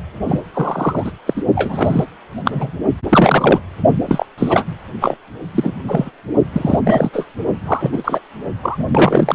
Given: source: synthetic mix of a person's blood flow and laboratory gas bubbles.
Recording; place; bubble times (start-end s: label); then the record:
Doppler ultrasound of blood flow; precordium
0.27-0.42 s: bubbles
0.53-1.11 s: bubbles
1.26-1.42 s: bubbles
1.55-2.05 s: bubbles
2.44-2.71 s: bubbles
3.09-3.60 s: bubbles
4.07-4.26 s: bubbles
4.38-4.64 s: bubbles
5.00-5.17 s: bubbles
5.54-5.71 s: bubbles
5.88-6.10 s: bubbles
6.52-6.79 s: bubbles
6.85-7.10 s: bubbles
7.12-7.25 s: bubbles
7.65-8.20 s: bubbles
8.62-8.85 s: bubbles
8.91-9.34 s: bubbles
From the record:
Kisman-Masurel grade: 243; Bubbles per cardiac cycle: several, 3 to 8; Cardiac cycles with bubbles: 100%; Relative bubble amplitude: loud (0.450 to 0.775); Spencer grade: 3 (all of the cardiac periods contain showers or single bubble signals, but not dominating or overriding the cardiac motion signals); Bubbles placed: only in the low amplitude regions of the cardiac cycle